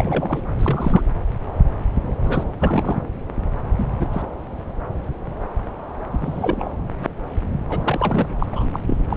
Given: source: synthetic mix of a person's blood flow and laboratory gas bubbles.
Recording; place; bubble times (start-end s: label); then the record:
Doppler ultrasound of blood flow; subclavian vein
0.00-0.41 s: bubbles
0.58-1.07 s: bubbles
2.25-2.44 s: bubbles
2.60-3.01 s: bubbles
3.77-3.86 s: bubbles
4.00-4.09 s: bubbles
4.12-4.22 s: bubbles
6.13-6.68 s: bubbles
7.69-8.27 s: bubbles
8.38-8.46 s: bubbles
8.52-8.70 s: bubbles
8.73-8.79 s: bubbles
8.87-8.97 s: bubbles
9.10-9.17 s: bubbles
From the record:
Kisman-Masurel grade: 222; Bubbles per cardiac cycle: several, 3 to 8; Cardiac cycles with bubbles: 10 to 50%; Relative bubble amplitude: moderate (0.250 to 0.450); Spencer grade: 2 (many but less than half of the cardiac periods contain bubble signals, singularly or in groups); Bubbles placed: anywhere in the cardiac cycle